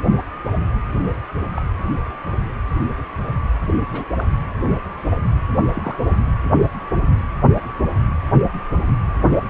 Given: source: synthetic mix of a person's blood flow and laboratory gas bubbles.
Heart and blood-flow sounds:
Doppler ultrasound of blood flow; precordium
1.55-1.62 s: bubbles
3.92-4.04 s: bubbles
4.17-4.24 s: bubbles
5.74-5.97 s: bubbles
9.26-9.41 s: bubbles
From the record:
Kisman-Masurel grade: 121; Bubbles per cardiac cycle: 1 to 2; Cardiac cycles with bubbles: 10 to 50%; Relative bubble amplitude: barely perceptible (0.100 to 0.250); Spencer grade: 2 (many but less than half of the cardiac periods contain bubble signals, singularly or in groups); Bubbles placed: anywhere in the cardiac cycle

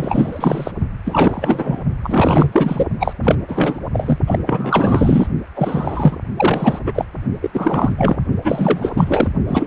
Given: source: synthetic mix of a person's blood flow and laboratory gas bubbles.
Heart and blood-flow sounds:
Doppler ultrasound of blood flow; precordium
0.00-0.71 s: bubbles
1.04-1.83 s: bubbles
2.03-2.86 s: bubbles
2.99-3.13 s: bubbles
3.22-3.35 s: bubbles
3.48-3.79 s: bubbles
3.93-4.18 s: bubbles
4.26-4.39 s: bubbles
4.46-5.27 s: bubbles
5.55-6.17 s: bubbles
6.36-6.79 s: bubbles
6.86-7.05 s: bubbles
7.41-7.50 s: bubbles
7.53-8.22 s: bubbles
8.44-9.28 s: bubbles
9.48-9.67 s: bubbles
From the record:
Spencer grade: 4 (maximum detectable bubble signal sounding continuously throughout systole and diastole of every cardiac period, and overriding the amplitude of the normal cardiac signals); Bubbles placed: only in the low amplitude regions of the cardiac cycle

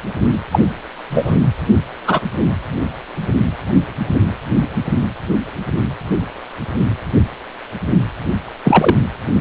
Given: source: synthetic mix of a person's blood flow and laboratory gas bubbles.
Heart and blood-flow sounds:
Doppler ultrasound of blood flow; precordium
0.52-0.59 s: bubbles
1.10-1.36 s: bubbles
2.06-2.20 s: bubbles
8.64-8.96 s: bubbles
From the record:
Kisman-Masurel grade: 123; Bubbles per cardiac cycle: 1 to 2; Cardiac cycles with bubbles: 10 to 50%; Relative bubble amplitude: loud (0.450 to 0.775); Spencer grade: 2 (many but less than half of the cardiac periods contain bubble signals, singularly or in groups); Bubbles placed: anywhere in the cardiac cycle

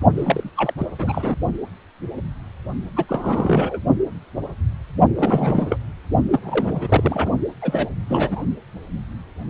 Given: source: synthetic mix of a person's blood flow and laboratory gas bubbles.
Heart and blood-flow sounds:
Doppler ultrasound of blood flow; precordium
0.16-0.49 s: bubbles
0.56-0.74 s: bubbles
0.77-0.86 s: bubbles
0.99-1.35 s: bubbles
2.95-3.05 s: bubbles
3.08-3.80 s: bubbles
5.15-5.77 s: bubbles
6.31-7.29 s: bubbles
7.62-7.90 s: bubbles
8.08-8.44 s: bubbles
From the record:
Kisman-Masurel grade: 332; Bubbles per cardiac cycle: rolling drumbeat, 9 or more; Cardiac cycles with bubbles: 50 to 99%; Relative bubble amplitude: moderate (0.250 to 0.450); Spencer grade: 3 (all of the cardiac periods contain showers or single bubble signals, but not dominating or overriding the cardiac motion signals); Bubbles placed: only in the low amplitude regions of the cardiac cycle

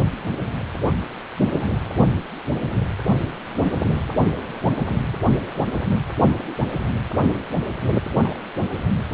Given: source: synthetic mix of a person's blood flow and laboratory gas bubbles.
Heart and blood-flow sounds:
Doppler ultrasound of blood flow; precordium
1.59-1.68 s: bubbles
4.49-4.53 s: bubbles
7.47-7.56 s: bubbles
8.21-8.38 s: bubbles
From the record:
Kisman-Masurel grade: 121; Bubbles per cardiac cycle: 1 to 2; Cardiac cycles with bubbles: 10 to 50%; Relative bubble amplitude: barely perceptible (0.100 to 0.250); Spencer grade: 2 (many but less than half of the cardiac periods contain bubble signals, singularly or in groups); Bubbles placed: anywhere in the cardiac cycle

